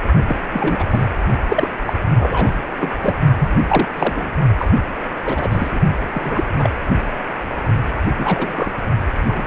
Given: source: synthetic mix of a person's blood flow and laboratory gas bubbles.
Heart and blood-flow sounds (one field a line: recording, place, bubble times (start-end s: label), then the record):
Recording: Doppler ultrasound of blood flow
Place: precordium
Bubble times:
0.26-0.40 s: bubbles
0.52-1.05 s: bubbles
1.48-1.69 s: bubbles
1.85-1.93 s: bubbles
2.17-2.52 s: bubbles
2.79-2.90 s: bubbles
3.02-3.15 s: bubbles
3.38-3.52 s: bubbles
3.67-3.88 s: bubbles
3.96-4.31 s: bubbles
4.58-4.69 s: bubbles
5.25-5.79 s: bubbles
6.13-6.49 s: bubbles
6.58-6.70 s: bubbles
8.16-8.72 s: bubbles
9.26-9.44 s: bubbles
From the record:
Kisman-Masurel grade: 243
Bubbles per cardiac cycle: several, 3 to 8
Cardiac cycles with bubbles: 100%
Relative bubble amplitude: loud (0.450 to 0.775)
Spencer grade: 3 (all of the cardiac periods contain showers or single bubble signals, but not dominating or overriding the cardiac motion signals)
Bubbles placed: only in the low amplitude regions of the cardiac cycle